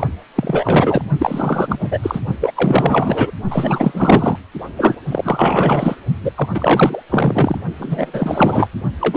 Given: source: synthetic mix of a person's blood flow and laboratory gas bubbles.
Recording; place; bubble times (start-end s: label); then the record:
Doppler ultrasound of blood flow; precordium
0.00-0.07 s: bubbles
0.35-1.02 s: bubbles
1.19-2.00 s: bubbles
2.02-2.20 s: bubbles
2.40-2.52 s: bubbles
2.54-3.31 s: bubbles
3.50-4.36 s: bubbles
4.76-4.95 s: bubbles
5.11-5.95 s: bubbles
6.22-6.31 s: bubbles
6.35-6.48 s: bubbles
6.54-7.02 s: bubbles
7.09-7.58 s: bubbles
7.78-8.68 s: bubbles
9.00-9.17 s: bubbles
From the record:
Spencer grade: 4 (maximum detectable bubble signal sounding continuously throughout systole and diastole of every cardiac period, and overriding the amplitude of the normal cardiac signals); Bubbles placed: only in the low amplitude regions of the cardiac cycle